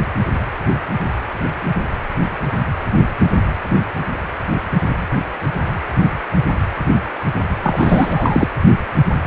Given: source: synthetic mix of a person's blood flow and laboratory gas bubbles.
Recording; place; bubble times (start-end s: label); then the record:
Doppler ultrasound of blood flow; precordium
7.62-8.49 s: bubbles
From the record:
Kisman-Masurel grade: 213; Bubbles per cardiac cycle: several, 3 to 8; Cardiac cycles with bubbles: 1 to 10%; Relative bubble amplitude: loud (0.450 to 0.775); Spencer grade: 1 (occasional bubble signal discernible with the cardiac motion signal, with majority of cardiac periods free of bubbles); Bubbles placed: anywhere in the cardiac cycle